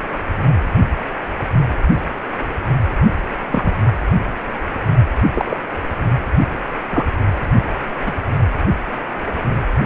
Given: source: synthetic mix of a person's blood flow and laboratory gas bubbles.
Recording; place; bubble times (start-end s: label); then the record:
Doppler ultrasound of blood flow; precordium
3.51-3.72 s: bubbles
5.34-5.57 s: bubbles
6.90-7.04 s: bubbles
8.05-8.13 s: bubbles
From the record:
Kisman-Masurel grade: 123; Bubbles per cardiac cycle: 1 to 2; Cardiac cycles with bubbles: 10 to 50%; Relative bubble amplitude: loud (0.450 to 0.775); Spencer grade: 2 (many but less than half of the cardiac periods contain bubble signals, singularly or in groups); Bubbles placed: anywhere in the cardiac cycle